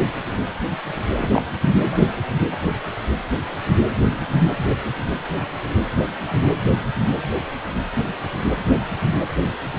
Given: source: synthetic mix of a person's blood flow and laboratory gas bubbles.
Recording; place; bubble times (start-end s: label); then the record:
Doppler ultrasound of blood flow; precordium
1.13-1.29 s: bubbles
1.33-1.42 s: bubbles
1.60-1.70 s: bubbles
1.76-2.06 s: bubbles
From the record:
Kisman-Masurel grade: 212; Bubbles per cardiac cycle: several, 3 to 8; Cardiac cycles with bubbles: 1 to 10%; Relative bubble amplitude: moderate (0.250 to 0.450); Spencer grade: 1 (occasional bubble signal discernible with the cardiac motion signal, with majority of cardiac periods free of bubbles); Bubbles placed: anywhere in the cardiac cycle